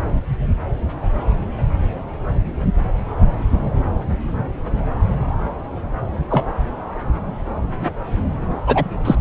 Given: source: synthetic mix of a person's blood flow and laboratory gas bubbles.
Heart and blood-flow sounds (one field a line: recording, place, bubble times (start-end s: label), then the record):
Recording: Doppler ultrasound of blood flow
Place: subclavian vein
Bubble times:
6.29-6.46 s: bubbles
8.67-8.85 s: bubbles
9.04-9.15 s: bubbles
From the record:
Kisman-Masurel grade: 113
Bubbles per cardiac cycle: 1 to 2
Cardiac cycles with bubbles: 1 to 10%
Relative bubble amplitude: loud (0.450 to 0.775)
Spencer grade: 1 (occasional bubble signal discernible with the cardiac motion signal, with majority of cardiac periods free of bubbles)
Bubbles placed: anywhere in the cardiac cycle